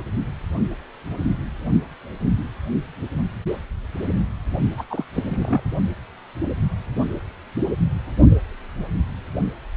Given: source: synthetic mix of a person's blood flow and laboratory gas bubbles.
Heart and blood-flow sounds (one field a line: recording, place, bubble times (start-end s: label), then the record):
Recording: Doppler ultrasound of blood flow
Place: precordium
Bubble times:
4.77-4.84 s: bubbles
4.90-5.04 s: bubbles
5.12-5.61 s: bubbles
From the record:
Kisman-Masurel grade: 212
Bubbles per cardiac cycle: several, 3 to 8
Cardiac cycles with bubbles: 1 to 10%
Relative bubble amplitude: moderate (0.250 to 0.450)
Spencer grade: 1 (occasional bubble signal discernible with the cardiac motion signal, with majority of cardiac periods free of bubbles)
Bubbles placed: only in the low amplitude regions of the cardiac cycle